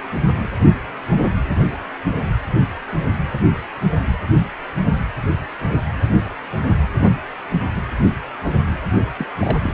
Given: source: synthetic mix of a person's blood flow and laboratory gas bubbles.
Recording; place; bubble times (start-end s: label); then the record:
Doppler ultrasound of blood flow; precordium
9.19-9.27 s: bubbles
9.39-9.74 s: bubbles
From the record:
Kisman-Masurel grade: 211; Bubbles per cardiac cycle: several, 3 to 8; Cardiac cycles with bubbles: 1 to 10%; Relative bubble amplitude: barely perceptible (0.100 to 0.250); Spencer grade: 1 (occasional bubble signal discernible with the cardiac motion signal, with majority of cardiac periods free of bubbles); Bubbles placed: only in the low amplitude regions of the cardiac cycle